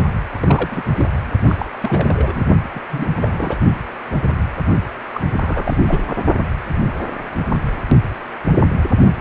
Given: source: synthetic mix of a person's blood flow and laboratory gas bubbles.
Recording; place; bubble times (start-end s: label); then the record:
Doppler ultrasound of blood flow; precordium
0.31-0.83 s: bubbles
0.97-1.06 s: bubbles
1.48-1.56 s: bubbles
1.58-1.65 s: bubbles
1.80-2.46 s: bubbles
2.74-2.80 s: bubbles
2.90-3.08 s: bubbles
3.22-3.59 s: bubbles
5.14-5.21 s: bubbles
5.39-5.83 s: bubbles
5.88-6.00 s: bubbles
6.07-6.12 s: bubbles
From the record:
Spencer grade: 3 (all of the cardiac periods contain showers or single bubble signals, but not dominating or overriding the cardiac motion signals); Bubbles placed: only in the low amplitude regions of the cardiac cycle